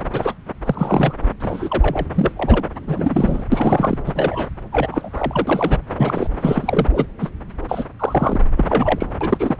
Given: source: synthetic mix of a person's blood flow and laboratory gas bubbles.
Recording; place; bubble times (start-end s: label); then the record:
Doppler ultrasound of blood flow; subclavian vein
0.00-0.02 s: bubbles
0.12-0.34 s: bubbles
0.65-1.15 s: bubbles
1.40-2.06 s: bubbles
2.15-2.31 s: bubbles
2.36-2.66 s: bubbles
2.87-3.45 s: bubbles
3.52-3.97 s: bubbles
4.05-4.49 s: bubbles
4.71-5.79 s: bubbles
5.96-6.28 s: bubbles
6.41-6.87 s: bubbles
6.93-7.06 s: bubbles
7.19-7.29 s: bubbles
7.68-7.86 s: bubbles
7.99-8.40 s: bubbles
8.57-8.65 s: bubbles
8.68-9.07 s: bubbles
9.21-9.56 s: bubbles
From the record:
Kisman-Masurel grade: 243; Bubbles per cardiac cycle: several, 3 to 8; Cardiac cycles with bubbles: 100%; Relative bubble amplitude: loud (0.450 to 0.775); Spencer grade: 3 (all of the cardiac periods contain showers or single bubble signals, but not dominating or overriding the cardiac motion signals); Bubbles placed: anywhere in the cardiac cycle